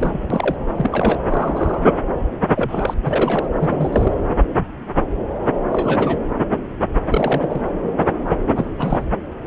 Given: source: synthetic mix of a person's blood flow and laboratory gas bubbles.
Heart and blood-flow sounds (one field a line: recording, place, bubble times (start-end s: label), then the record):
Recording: Doppler ultrasound of blood flow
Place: subclavian vein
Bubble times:
0.00-0.55 s: bubbles
0.76-1.21 s: bubbles
1.29-1.79 s: bubbles
2.55-2.94 s: bubbles
3.05-3.48 s: bubbles
3.60-4.15 s: bubbles
5.71-6.19 s: bubbles
7.10-7.62 s: bubbles
8.56-8.65 s: bubbles
8.77-9.07 s: bubbles
From the record:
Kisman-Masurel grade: 232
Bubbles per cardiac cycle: several, 3 to 8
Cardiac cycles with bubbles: 50 to 99%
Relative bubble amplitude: moderate (0.250 to 0.450)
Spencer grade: 3 (all of the cardiac periods contain showers or single bubble signals, but not dominating or overriding the cardiac motion signals)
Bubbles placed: anywhere in the cardiac cycle